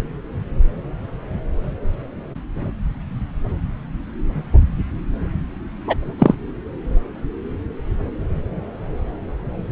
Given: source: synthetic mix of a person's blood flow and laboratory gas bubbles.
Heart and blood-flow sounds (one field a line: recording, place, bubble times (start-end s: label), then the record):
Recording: Doppler ultrasound of blood flow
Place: subclavian vein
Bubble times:
5.88-5.95 s: bubbles
6.18-6.34 s: bubbles
From the record:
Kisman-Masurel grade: 113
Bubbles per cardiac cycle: 1 to 2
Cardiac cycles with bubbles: 1 to 10%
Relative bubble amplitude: loud (0.450 to 0.775)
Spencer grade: 1 (occasional bubble signal discernible with the cardiac motion signal, with majority of cardiac periods free of bubbles)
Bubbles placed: anywhere in the cardiac cycle